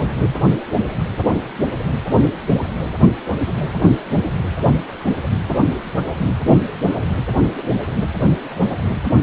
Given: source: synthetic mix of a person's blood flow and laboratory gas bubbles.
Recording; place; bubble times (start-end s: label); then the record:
Doppler ultrasound of blood flow; precordium
0.27-0.34 s: bubbles
From the record:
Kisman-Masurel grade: 111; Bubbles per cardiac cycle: 1 to 2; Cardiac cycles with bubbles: 1 to 10%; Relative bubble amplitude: barely perceptible (0.100 to 0.250); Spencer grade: 1 (occasional bubble signal discernible with the cardiac motion signal, with majority of cardiac periods free of bubbles); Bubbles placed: anywhere in the cardiac cycle